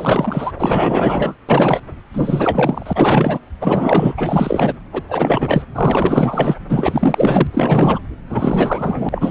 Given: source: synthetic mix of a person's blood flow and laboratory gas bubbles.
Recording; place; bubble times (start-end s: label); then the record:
Doppler ultrasound of blood flow; subclavian vein
0.00-0.51 s: bubbles
0.55-1.35 s: bubbles
1.49-1.80 s: bubbles
2.13-3.38 s: bubbles
3.61-4.14 s: bubbles
4.17-4.73 s: bubbles
4.93-5.02 s: bubbles
5.08-5.62 s: bubbles
5.75-6.55 s: bubbles
6.69-7.47 s: bubbles
7.52-7.99 s: bubbles
8.29-9.31 s: bubbles
From the record:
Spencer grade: 4 (maximum detectable bubble signal sounding continuously throughout systole and diastole of every cardiac period, and overriding the amplitude of the normal cardiac signals); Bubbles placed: anywhere in the cardiac cycle